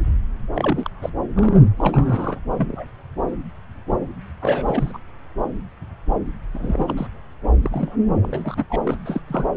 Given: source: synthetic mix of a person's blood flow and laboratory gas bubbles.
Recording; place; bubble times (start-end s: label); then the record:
Doppler ultrasound of blood flow; subclavian vein
0.56-0.90 s: bubbles
1.02-1.10 s: bubbles
1.36-1.66 s: bubbles
1.78-2.40 s: bubbles
2.56-2.85 s: bubbles
4.42-4.99 s: bubbles
6.54-7.07 s: bubbles
7.63-7.96 s: bubbles
8.22-8.65 s: bubbles
8.69-8.80 s: bubbles
8.84-8.97 s: bubbles
9.05-9.19 s: bubbles
9.27-9.46 s: bubbles
From the record:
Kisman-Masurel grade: 332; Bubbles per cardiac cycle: rolling drumbeat, 9 or more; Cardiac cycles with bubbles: 50 to 99%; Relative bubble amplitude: moderate (0.250 to 0.450); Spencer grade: 3 (all of the cardiac periods contain showers or single bubble signals, but not dominating or overriding the cardiac motion signals); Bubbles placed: anywhere in the cardiac cycle